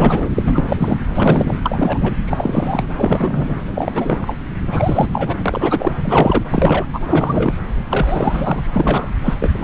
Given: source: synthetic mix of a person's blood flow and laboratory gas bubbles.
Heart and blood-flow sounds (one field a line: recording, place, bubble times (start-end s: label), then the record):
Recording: Doppler ultrasound of blood flow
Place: subclavian vein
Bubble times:
0.00-0.29 s: bubbles
0.35-0.77 s: bubbles
0.79-0.97 s: bubbles
1.07-1.58 s: bubbles
1.62-2.13 s: bubbles
2.25-2.87 s: bubbles
2.96-3.60 s: bubbles
3.74-4.19 s: bubbles
4.21-4.36 s: bubbles
4.71-5.09 s: bubbles
5.12-5.36 s: bubbles
5.46-5.95 s: bubbles
6.04-6.42 s: bubbles
6.51-6.85 s: bubbles
6.93-7.00 s: bubbles
7.08-7.54 s: bubbles
7.89-8.66 s: bubbles
8.73-9.12 s: bubbles
9.24-9.34 s: bubbles
9.40-9.64 s: bubbles
From the record:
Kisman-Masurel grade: 343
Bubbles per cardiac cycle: rolling drumbeat, 9 or more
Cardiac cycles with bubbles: 100%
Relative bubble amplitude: loud (0.450 to 0.775)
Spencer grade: 3 (all of the cardiac periods contain showers or single bubble signals, but not dominating or overriding the cardiac motion signals)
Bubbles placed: anywhere in the cardiac cycle